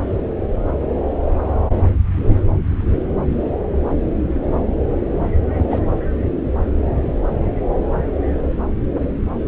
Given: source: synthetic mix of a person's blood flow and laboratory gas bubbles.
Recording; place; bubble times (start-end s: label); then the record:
Doppler ultrasound of blood flow; subclavian vein
5.50-5.65 s: bubbles
5.70-5.79 s: bubbles
From the record:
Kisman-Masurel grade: 211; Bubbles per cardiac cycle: several, 3 to 8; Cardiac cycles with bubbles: 1 to 10%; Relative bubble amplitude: barely perceptible (0.100 to 0.250); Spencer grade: 1 (occasional bubble signal discernible with the cardiac motion signal, with majority of cardiac periods free of bubbles); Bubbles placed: anywhere in the cardiac cycle